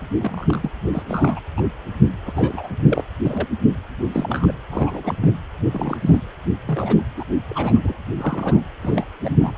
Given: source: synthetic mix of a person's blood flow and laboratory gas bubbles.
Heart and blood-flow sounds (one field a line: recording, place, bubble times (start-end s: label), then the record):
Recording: Doppler ultrasound of blood flow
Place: precordium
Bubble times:
0.19-0.71 s: bubbles
0.92-1.02 s: bubbles
1.08-1.40 s: bubbles
1.56-1.61 s: bubbles
2.26-2.68 s: bubbles
2.88-3.04 s: bubbles
3.25-3.47 s: bubbles
4.12-4.53 s: bubbles
4.71-5.15 s: bubbles
5.21-5.33 s: bubbles
5.72-5.98 s: bubbles
6.01-6.19 s: bubbles
6.66-7.02 s: bubbles
7.17-7.25 s: bubbles
7.50-7.79 s: bubbles
7.83-7.94 s: bubbles
8.17-8.62 s: bubbles
8.81-9.04 s: bubbles
9.21-9.37 s: bubbles
9.40-9.54 s: bubbles
From the record:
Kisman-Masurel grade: 242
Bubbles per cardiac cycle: several, 3 to 8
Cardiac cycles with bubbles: 100%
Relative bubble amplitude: moderate (0.250 to 0.450)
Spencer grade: 3 (all of the cardiac periods contain showers or single bubble signals, but not dominating or overriding the cardiac motion signals)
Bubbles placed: anywhere in the cardiac cycle